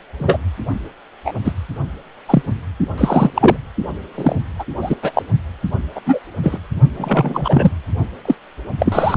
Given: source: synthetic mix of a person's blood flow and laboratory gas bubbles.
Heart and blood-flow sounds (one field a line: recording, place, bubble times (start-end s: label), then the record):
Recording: Doppler ultrasound of blood flow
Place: precordium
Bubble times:
0.19-0.39 s: bubbles
1.25-1.32 s: bubbles
1.45-1.53 s: bubbles
2.28-2.42 s: bubbles
2.98-3.31 s: bubbles
3.34-3.57 s: bubbles
4.14-4.36 s: bubbles
4.58-4.64 s: bubbles
4.81-4.96 s: bubbles
5.03-5.22 s: bubbles
5.95-6.00 s: bubbles
6.05-6.19 s: bubbles
6.42-6.58 s: bubbles
6.97-7.71 s: bubbles
8.25-8.35 s: bubbles
8.79-9.17 s: bubbles
From the record:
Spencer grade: 3 (all of the cardiac periods contain showers or single bubble signals, but not dominating or overriding the cardiac motion signals)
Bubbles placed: only in the low amplitude regions of the cardiac cycle